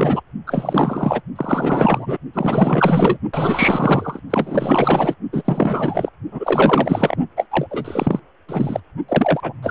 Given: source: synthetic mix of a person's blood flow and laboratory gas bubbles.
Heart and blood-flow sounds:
Doppler ultrasound of blood flow; precordium
0.00-0.21 s: bubbles
0.46-1.21 s: bubbles
1.35-2.17 s: bubbles
2.33-3.18 s: bubbles
3.32-4.20 s: bubbles
4.30-5.14 s: bubbles
5.32-6.09 s: bubbles
6.31-7.16 s: bubbles
7.37-7.47 s: bubbles
7.51-7.67 s: bubbles
7.71-8.20 s: bubbles
8.49-8.80 s: bubbles
9.08-9.53 s: bubbles
9.62-9.71 s: bubbles
From the record:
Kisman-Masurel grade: 444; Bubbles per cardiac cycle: continuous sound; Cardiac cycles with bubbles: 100%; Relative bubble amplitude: maximal (0.775 to 0.999); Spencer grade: 4 (maximum detectable bubble signal sounding continuously throughout systole and diastole of every cardiac period, and overriding the amplitude of the normal cardiac signals); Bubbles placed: only in the low amplitude regions of the cardiac cycle

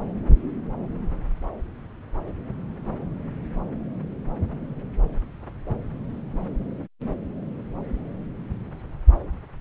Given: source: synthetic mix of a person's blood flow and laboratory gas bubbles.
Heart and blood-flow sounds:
Doppler ultrasound of blood flow; subclavian vein
no bubbles
From the record:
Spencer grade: 0 (complete lack of bubble signals)

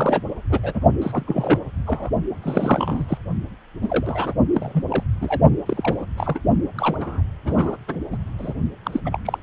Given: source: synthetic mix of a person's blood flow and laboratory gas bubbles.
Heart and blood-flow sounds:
Doppler ultrasound of blood flow; precordium
0.00-0.23 s: bubbles
0.49-0.60 s: bubbles
0.62-0.80 s: bubbles
1.01-1.24 s: bubbles
1.27-1.59 s: bubbles
1.86-2.09 s: bubbles
2.42-3.05 s: bubbles
3.08-3.17 s: bubbles
3.82-4.34 s: bubbles
4.54-4.83 s: bubbles
4.89-5.04 s: bubbles
5.21-5.42 s: bubbles
5.66-6.06 s: bubbles
6.17-6.39 s: bubbles
6.78-7.22 s: bubbles
7.45-7.77 s: bubbles
7.88-7.97 s: bubbles
8.12-8.18 s: bubbles
8.38-8.54 s: bubbles
8.83-9.00 s: bubbles
9.04-9.20 s: bubbles
9.25-9.38 s: bubbles
From the record:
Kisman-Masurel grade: 242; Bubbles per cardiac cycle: several, 3 to 8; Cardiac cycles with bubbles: 100%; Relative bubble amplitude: moderate (0.250 to 0.450); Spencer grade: 3 (all of the cardiac periods contain showers or single bubble signals, but not dominating or overriding the cardiac motion signals); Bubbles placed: only in the low amplitude regions of the cardiac cycle

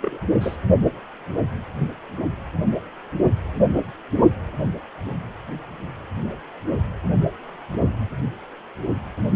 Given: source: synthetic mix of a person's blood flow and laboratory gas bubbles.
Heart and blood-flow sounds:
Doppler ultrasound of blood flow; precordium
0.01-0.20 s: bubbles
0.40-0.56 s: bubbles
From the record:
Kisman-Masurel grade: 121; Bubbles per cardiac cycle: 1 to 2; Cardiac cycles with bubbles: 10 to 50%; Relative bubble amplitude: barely perceptible (0.100 to 0.250); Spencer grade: 2 (many but less than half of the cardiac periods contain bubble signals, singularly or in groups); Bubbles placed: only in the low amplitude regions of the cardiac cycle

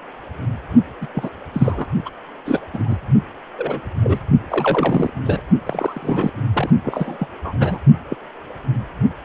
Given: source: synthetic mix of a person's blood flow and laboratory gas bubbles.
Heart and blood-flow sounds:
Doppler ultrasound of blood flow; precordium
1.01-1.07 s: bubbles
1.14-1.29 s: bubbles
1.53-1.86 s: bubbles
2.05-2.10 s: bubbles
2.45-2.59 s: bubbles
2.73-2.99 s: bubbles
3.58-3.80 s: bubbles
4.02-4.19 s: bubbles
4.48-5.10 s: bubbles
5.25-5.42 s: bubbles
5.65-6.31 s: bubbles
6.53-6.70 s: bubbles
6.83-7.27 s: bubbles
7.44-7.79 s: bubbles
8.10-8.17 s: bubbles
From the record:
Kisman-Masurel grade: 242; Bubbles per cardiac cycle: several, 3 to 8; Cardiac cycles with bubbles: 100%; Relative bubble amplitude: moderate (0.250 to 0.450); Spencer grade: 3 (all of the cardiac periods contain showers or single bubble signals, but not dominating or overriding the cardiac motion signals); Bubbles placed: only in the low amplitude regions of the cardiac cycle

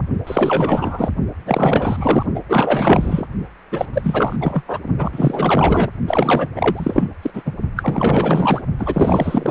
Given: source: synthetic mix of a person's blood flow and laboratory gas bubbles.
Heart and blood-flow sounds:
Doppler ultrasound of blood flow; precordium
0.26-1.11 s: bubbles
1.45-2.26 s: bubbles
2.35-2.41 s: bubbles
2.49-3.26 s: bubbles
3.71-3.86 s: bubbles
3.94-4.36 s: bubbles
4.39-4.63 s: bubbles
4.67-4.79 s: bubbles
4.98-5.89 s: bubbles
6.07-6.46 s: bubbles
6.55-7.08 s: bubbles
7.22-7.30 s: bubbles
7.33-7.52 s: bubbles
7.76-8.62 s: bubbles
8.78-9.51 s: bubbles
From the record:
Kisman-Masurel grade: 444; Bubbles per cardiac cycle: continuous sound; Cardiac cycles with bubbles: 100%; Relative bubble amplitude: maximal (0.775 to 0.999); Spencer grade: 4 (maximum detectable bubble signal sounding continuously throughout systole and diastole of every cardiac period, and overriding the amplitude of the normal cardiac signals); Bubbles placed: only in the low amplitude regions of the cardiac cycle

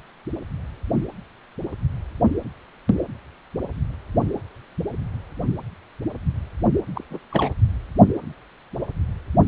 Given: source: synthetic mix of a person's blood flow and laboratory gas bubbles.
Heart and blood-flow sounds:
Doppler ultrasound of blood flow; precordium
6.95-7.04 s: bubbles
7.10-7.18 s: bubbles
7.30-7.54 s: bubbles
From the record:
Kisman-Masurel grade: 211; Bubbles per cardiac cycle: several, 3 to 8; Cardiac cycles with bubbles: 1 to 10%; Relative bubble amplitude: barely perceptible (0.100 to 0.250); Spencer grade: 1 (occasional bubble signal discernible with the cardiac motion signal, with majority of cardiac periods free of bubbles); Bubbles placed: anywhere in the cardiac cycle

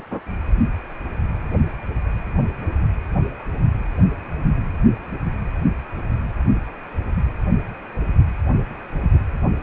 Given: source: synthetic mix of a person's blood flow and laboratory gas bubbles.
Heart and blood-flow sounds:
Doppler ultrasound of blood flow; precordium
no bubbles
From the record:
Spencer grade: 0 (complete lack of bubble signals)

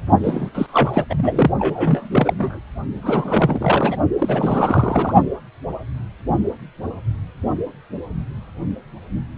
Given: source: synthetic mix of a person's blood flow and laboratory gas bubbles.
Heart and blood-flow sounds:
Doppler ultrasound of blood flow; precordium
0.23-0.50 s: bubbles
0.55-1.04 s: bubbles
1.09-1.51 s: bubbles
1.59-2.33 s: bubbles
2.38-2.59 s: bubbles
3.02-3.96 s: bubbles
4.18-5.15 s: bubbles
From the record:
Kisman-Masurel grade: 332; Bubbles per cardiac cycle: rolling drumbeat, 9 or more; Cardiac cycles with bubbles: 50 to 99%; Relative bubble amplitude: moderate (0.250 to 0.450); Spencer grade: 3 (all of the cardiac periods contain showers or single bubble signals, but not dominating or overriding the cardiac motion signals); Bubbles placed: only in the low amplitude regions of the cardiac cycle

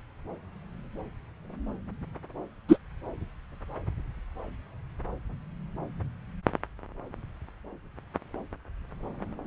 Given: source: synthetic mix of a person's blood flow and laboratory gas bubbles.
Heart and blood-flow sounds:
Doppler ultrasound of blood flow; subclavian vein
2.68-2.77 s: bubbles
From the record:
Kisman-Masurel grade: 113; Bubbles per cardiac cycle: 1 to 2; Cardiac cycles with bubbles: 1 to 10%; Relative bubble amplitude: loud (0.450 to 0.775); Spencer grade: 1 (occasional bubble signal discernible with the cardiac motion signal, with majority of cardiac periods free of bubbles); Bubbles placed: anywhere in the cardiac cycle

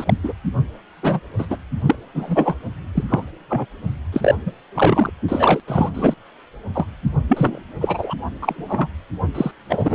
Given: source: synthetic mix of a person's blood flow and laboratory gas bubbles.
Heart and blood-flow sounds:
Doppler ultrasound of blood flow; precordium
0.00-0.14 s: bubbles
0.23-0.32 s: bubbles
1.02-1.20 s: bubbles
1.38-1.46 s: bubbles
1.50-1.58 s: bubbles
1.86-1.95 s: bubbles
2.15-2.56 s: bubbles
2.95-3.04 s: bubbles
3.09-3.23 s: bubbles
3.49-3.66 s: bubbles
4.12-4.35 s: bubbles
4.46-4.53 s: bubbles
4.75-5.09 s: bubbles
5.28-5.60 s: bubbles
5.67-5.90 s: bubbles
5.94-6.14 s: bubbles
6.75-6.86 s: bubbles
7.28-7.60 s: bubbles
7.80-8.16 s: bubbles
8.42-8.88 s: bubbles
9.35-9.52 s: bubbles
9.69-9.95 s: bubbles
From the record:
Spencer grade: 3 (all of the cardiac periods contain showers or single bubble signals, but not dominating or overriding the cardiac motion signals); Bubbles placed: anywhere in the cardiac cycle

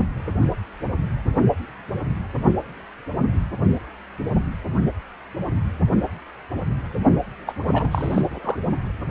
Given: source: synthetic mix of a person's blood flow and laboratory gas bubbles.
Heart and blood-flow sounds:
Doppler ultrasound of blood flow; precordium
7.46-7.52 s: bubbles
7.72-8.62 s: bubbles
From the record:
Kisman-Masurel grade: 212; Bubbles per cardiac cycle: several, 3 to 8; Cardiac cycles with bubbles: 1 to 10%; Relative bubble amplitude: moderate (0.250 to 0.450); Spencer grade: 1 (occasional bubble signal discernible with the cardiac motion signal, with majority of cardiac periods free of bubbles); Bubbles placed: only in the low amplitude regions of the cardiac cycle

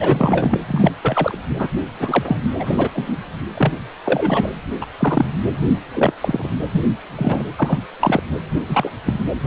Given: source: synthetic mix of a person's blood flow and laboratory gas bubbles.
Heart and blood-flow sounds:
Doppler ultrasound of blood flow; precordium
0.00-0.58 s: bubbles
0.68-0.92 s: bubbles
1.02-1.37 s: bubbles
1.58-1.68 s: bubbles
1.99-2.37 s: bubbles
2.59-2.89 s: bubbles
2.94-3.17 s: bubbles
3.56-3.73 s: bubbles
4.04-4.49 s: bubbles
4.81-4.87 s: bubbles
4.99-5.25 s: bubbles
5.94-6.13 s: bubbles
6.20-6.48 s: bubbles
6.72-6.81 s: bubbles
7.17-7.43 s: bubbles
7.57-7.79 s: bubbles
8.00-8.21 s: bubbles
8.68-8.89 s: bubbles
9.05-9.21 s: bubbles
From the record:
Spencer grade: 3 (all of the cardiac periods contain showers or single bubble signals, but not dominating or overriding the cardiac motion signals); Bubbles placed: anywhere in the cardiac cycle

